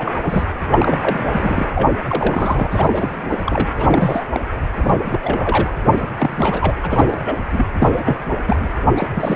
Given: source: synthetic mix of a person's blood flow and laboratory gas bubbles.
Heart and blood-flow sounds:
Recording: Doppler ultrasound of blood flow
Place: precordium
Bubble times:
0.00-0.20 s: bubbles
0.22-0.44 s: bubbles
0.69-0.98 s: bubbles
1.03-1.67 s: bubbles
1.74-1.88 s: bubbles
2.08-3.68 s: bubbles
3.75-4.27 s: bubbles
4.32-4.40 s: bubbles
4.76-5.02 s: bubbles
5.05-5.75 s: bubbles
5.85-6.07 s: bubbles
6.18-6.74 s: bubbles
6.82-7.36 s: bubbles
7.52-7.66 s: bubbles
7.78-8.25 s: bubbles
8.46-8.66 s: bubbles
8.95-9.36 s: bubbles
From the record:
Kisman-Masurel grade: 332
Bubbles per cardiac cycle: rolling drumbeat, 9 or more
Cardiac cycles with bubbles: 50 to 99%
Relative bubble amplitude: moderate (0.250 to 0.450)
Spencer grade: 3 (all of the cardiac periods contain showers or single bubble signals, but not dominating or overriding the cardiac motion signals)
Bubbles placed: anywhere in the cardiac cycle

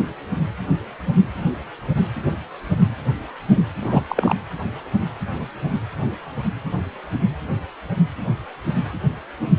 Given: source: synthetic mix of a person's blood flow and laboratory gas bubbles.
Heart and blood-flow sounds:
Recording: Doppler ultrasound of blood flow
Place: precordium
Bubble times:
3.81-4.03 s: bubbles
4.09-4.34 s: bubbles
From the record:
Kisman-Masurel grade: 212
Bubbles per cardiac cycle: several, 3 to 8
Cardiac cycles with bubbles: 1 to 10%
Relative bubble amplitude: moderate (0.250 to 0.450)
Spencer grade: 1 (occasional bubble signal discernible with the cardiac motion signal, with majority of cardiac periods free of bubbles)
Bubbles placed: anywhere in the cardiac cycle

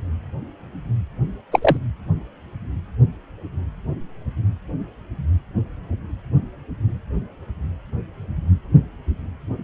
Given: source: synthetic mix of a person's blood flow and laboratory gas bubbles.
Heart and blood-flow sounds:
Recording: Doppler ultrasound of blood flow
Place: precordium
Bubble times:
1.51-1.77 s: bubbles
From the record:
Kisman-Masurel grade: 113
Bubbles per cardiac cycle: 1 to 2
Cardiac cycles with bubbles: 1 to 10%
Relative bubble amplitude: loud (0.450 to 0.775)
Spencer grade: 1 (occasional bubble signal discernible with the cardiac motion signal, with majority of cardiac periods free of bubbles)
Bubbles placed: anywhere in the cardiac cycle

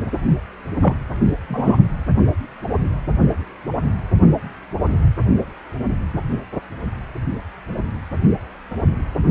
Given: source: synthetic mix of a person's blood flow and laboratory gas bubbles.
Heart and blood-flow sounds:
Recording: Doppler ultrasound of blood flow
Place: precordium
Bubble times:
0.81-0.96 s: bubbles
1.48-1.77 s: bubbles
From the record:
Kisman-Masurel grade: 123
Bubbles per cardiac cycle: 1 to 2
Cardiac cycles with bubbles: 10 to 50%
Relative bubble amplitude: loud (0.450 to 0.775)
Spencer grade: 2 (many but less than half of the cardiac periods contain bubble signals, singularly or in groups)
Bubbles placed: only in the low amplitude regions of the cardiac cycle

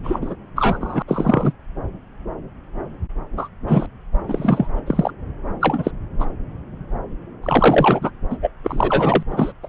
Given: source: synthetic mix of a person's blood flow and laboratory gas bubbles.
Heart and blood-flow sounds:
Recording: Doppler ultrasound of blood flow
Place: subclavian vein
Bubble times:
0.03-0.19 s: bubbles
0.21-0.35 s: bubbles
0.56-1.02 s: bubbles
1.08-1.52 s: bubbles
3.37-3.48 s: bubbles
3.67-3.86 s: bubbles
4.28-4.68 s: bubbles
4.86-5.11 s: bubbles
5.60-5.91 s: bubbles
6.19-6.26 s: bubbles
7.43-8.11 s: bubbles
8.30-8.38 s: bubbles
8.41-8.49 s: bubbles
8.62-9.23 s: bubbles
9.30-9.52 s: bubbles
9.63-9.68 s: bubbles
From the record:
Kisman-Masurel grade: 233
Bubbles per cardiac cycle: several, 3 to 8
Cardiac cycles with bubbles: 50 to 99%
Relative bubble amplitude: loud (0.450 to 0.775)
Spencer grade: 3 (all of the cardiac periods contain showers or single bubble signals, but not dominating or overriding the cardiac motion signals)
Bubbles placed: anywhere in the cardiac cycle

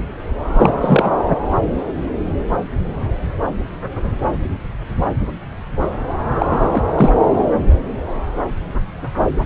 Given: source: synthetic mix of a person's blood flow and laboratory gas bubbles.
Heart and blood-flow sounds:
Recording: Doppler ultrasound of blood flow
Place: subclavian vein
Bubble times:
0.54-0.74 s: bubbles
0.80-1.14 s: bubbles
6.40-6.84 s: bubbles
6.96-7.13 s: bubbles
From the record:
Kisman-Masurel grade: 213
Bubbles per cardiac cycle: several, 3 to 8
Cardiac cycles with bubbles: 1 to 10%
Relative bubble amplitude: loud (0.450 to 0.775)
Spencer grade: 1 (occasional bubble signal discernible with the cardiac motion signal, with majority of cardiac periods free of bubbles)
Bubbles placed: anywhere in the cardiac cycle

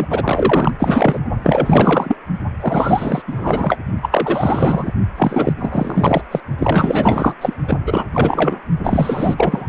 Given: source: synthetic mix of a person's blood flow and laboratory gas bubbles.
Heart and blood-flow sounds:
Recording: Doppler ultrasound of blood flow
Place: precordium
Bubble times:
0.00-0.07 s: bubbles
0.10-0.71 s: bubbles
0.79-1.20 s: bubbles
1.43-2.16 s: bubbles
2.60-3.22 s: bubbles
3.27-3.78 s: bubbles
4.02-4.92 s: bubbles
5.16-5.53 s: bubbles
5.60-6.21 s: bubbles
6.31-6.40 s: bubbles
6.58-7.35 s: bubbles
7.41-7.54 s: bubbles
7.68-7.78 s: bubbles
7.86-8.04 s: bubbles
8.12-8.57 s: bubbles
8.84-9.69 s: bubbles
From the record:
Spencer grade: 4 (maximum detectable bubble signal sounding continuously throughout systole and diastole of every cardiac period, and overriding the amplitude of the normal cardiac signals)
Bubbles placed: only in the low amplitude regions of the cardiac cycle

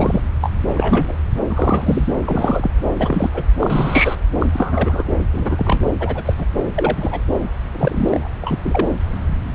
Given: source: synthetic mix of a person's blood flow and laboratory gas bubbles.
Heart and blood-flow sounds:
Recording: Doppler ultrasound of blood flow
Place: subclavian vein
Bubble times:
0.00-0.21 s: bubbles
0.41-0.51 s: bubbles
0.74-1.17 s: bubbles
1.48-2.13 s: bubbles
2.25-2.71 s: bubbles
2.97-3.30 s: bubbles
3.34-3.43 s: bubbles
3.59-4.15 s: bubbles
4.39-4.46 s: bubbles
4.53-5.03 s: bubbles
5.33-5.80 s: bubbles
6.00-6.22 s: bubbles
6.25-6.33 s: bubbles
6.38-6.46 s: bubbles
6.76-7.21 s: bubbles
7.72-8.29 s: bubbles
8.42-8.58 s: bubbles
8.65-8.88 s: bubbles
From the record:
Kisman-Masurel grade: 242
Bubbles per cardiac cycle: several, 3 to 8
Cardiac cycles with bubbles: 100%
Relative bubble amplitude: moderate (0.250 to 0.450)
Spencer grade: 3 (all of the cardiac periods contain showers or single bubble signals, but not dominating or overriding the cardiac motion signals)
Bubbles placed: anywhere in the cardiac cycle

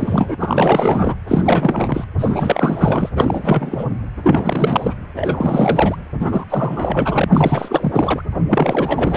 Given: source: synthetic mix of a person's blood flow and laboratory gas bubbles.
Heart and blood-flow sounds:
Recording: Doppler ultrasound of blood flow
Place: precordium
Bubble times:
0.00-0.35 s: bubbles
0.40-1.16 s: bubbles
1.27-2.05 s: bubbles
2.18-3.09 s: bubbles
3.15-3.85 s: bubbles
4.23-4.94 s: bubbles
5.16-5.96 s: bubbles
6.20-6.45 s: bubbles
6.50-8.22 s: bubbles
8.50-9.17 s: bubbles
From the record:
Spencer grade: 4 (maximum detectable bubble signal sounding continuously throughout systole and diastole of every cardiac period, and overriding the amplitude of the normal cardiac signals)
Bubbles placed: anywhere in the cardiac cycle

